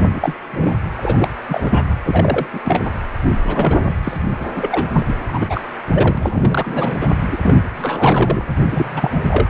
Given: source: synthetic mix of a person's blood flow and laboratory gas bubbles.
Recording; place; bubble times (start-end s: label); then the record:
Doppler ultrasound of blood flow; precordium
0.00-0.35 s: bubbles
0.52-0.75 s: bubbles
0.97-1.28 s: bubbles
1.49-1.95 s: bubbles
2.06-2.46 s: bubbles
2.53-2.60 s: bubbles
2.64-2.91 s: bubbles
3.45-3.95 s: bubbles
4.03-4.17 s: bubbles
4.40-4.46 s: bubbles
4.56-4.89 s: bubbles
4.92-5.15 s: bubbles
5.27-5.61 s: bubbles
5.92-6.17 s: bubbles
6.21-6.97 s: bubbles
7.00-7.08 s: bubbles
7.32-7.37 s: bubbles
7.42-7.58 s: bubbles
7.76-8.45 s: bubbles
8.63-9.49 s: bubbles
From the record:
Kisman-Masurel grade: 343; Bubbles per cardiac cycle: rolling drumbeat, 9 or more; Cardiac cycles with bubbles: 100%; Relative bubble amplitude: loud (0.450 to 0.775); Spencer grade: 3 (all of the cardiac periods contain showers or single bubble signals, but not dominating or overriding the cardiac motion signals); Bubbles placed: anywhere in the cardiac cycle